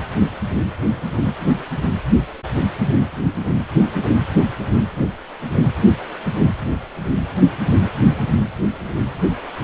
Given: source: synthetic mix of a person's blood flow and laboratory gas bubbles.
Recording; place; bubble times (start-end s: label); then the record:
Doppler ultrasound of blood flow; precordium
no bubbles
From the record:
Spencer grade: 0 (complete lack of bubble signals)